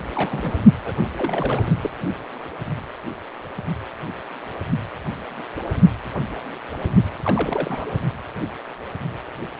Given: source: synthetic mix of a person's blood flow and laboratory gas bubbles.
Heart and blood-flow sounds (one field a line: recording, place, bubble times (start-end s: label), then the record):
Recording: Doppler ultrasound of blood flow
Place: precordium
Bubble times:
0.15-0.59 s: bubbles
0.84-0.95 s: bubbles
1.17-1.77 s: bubbles
1.81-1.90 s: bubbles
7.25-8.00 s: bubbles
From the record:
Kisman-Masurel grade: 221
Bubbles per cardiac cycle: several, 3 to 8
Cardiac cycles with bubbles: 10 to 50%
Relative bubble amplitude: barely perceptible (0.100 to 0.250)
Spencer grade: 2 (many but less than half of the cardiac periods contain bubble signals, singularly or in groups)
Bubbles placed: only in the low amplitude regions of the cardiac cycle